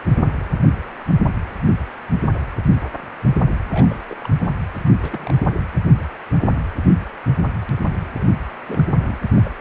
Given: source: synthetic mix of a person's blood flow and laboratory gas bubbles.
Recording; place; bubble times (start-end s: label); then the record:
Doppler ultrasound of blood flow; precordium
3.71-4.03 s: bubbles
4.10-4.15 s: bubbles
4.20-4.29 s: bubbles
4.39-4.50 s: bubbles
4.84-4.89 s: bubbles
5.02-5.41 s: bubbles
8.18-8.26 s: bubbles
8.67-8.84 s: bubbles
8.86-9.17 s: bubbles
9.36-9.52 s: bubbles
From the record:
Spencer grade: 2 (many but less than half of the cardiac periods contain bubble signals, singularly or in groups); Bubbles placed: anywhere in the cardiac cycle